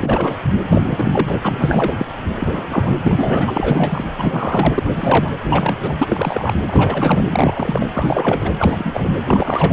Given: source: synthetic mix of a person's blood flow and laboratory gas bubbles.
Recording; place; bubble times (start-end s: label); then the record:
Doppler ultrasound of blood flow; precordium
0.00-0.35 s: bubbles
0.68-1.95 s: bubbles
1.98-2.06 s: bubbles
2.37-2.96 s: bubbles
3.02-4.04 s: bubbles
4.13-4.83 s: bubbles
4.93-5.30 s: bubbles
5.42-5.76 s: bubbles
5.82-5.94 s: bubbles
5.97-6.54 s: bubbles
6.68-7.24 s: bubbles
7.30-7.86 s: bubbles
7.93-8.51 s: bubbles
8.58-9.10 s: bubbles
9.24-9.73 s: bubbles
From the record:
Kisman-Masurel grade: 343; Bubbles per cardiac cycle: rolling drumbeat, 9 or more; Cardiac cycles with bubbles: 100%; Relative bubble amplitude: loud (0.450 to 0.775); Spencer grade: 3 (all of the cardiac periods contain showers or single bubble signals, but not dominating or overriding the cardiac motion signals); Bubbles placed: anywhere in the cardiac cycle